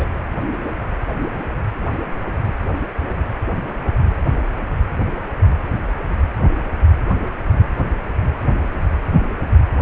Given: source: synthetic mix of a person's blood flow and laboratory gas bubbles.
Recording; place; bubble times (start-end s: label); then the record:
Doppler ultrasound of blood flow; precordium
0.00-0.07 s: bubbles
From the record:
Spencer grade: 1 (occasional bubble signal discernible with the cardiac motion signal, with majority of cardiac periods free of bubbles); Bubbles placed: anywhere in the cardiac cycle